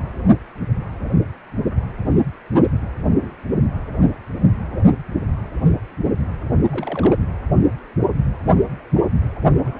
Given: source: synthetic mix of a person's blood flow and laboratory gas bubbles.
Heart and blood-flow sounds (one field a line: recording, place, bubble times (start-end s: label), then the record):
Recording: Doppler ultrasound of blood flow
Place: precordium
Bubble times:
3.21-3.35 s: bubbles
6.71-7.16 s: bubbles
9.64-9.80 s: bubbles
From the record:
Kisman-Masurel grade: 121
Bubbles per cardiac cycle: 1 to 2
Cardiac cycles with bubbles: 10 to 50%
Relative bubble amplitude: barely perceptible (0.100 to 0.250)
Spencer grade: 2 (many but less than half of the cardiac periods contain bubble signals, singularly or in groups)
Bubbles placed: only in the low amplitude regions of the cardiac cycle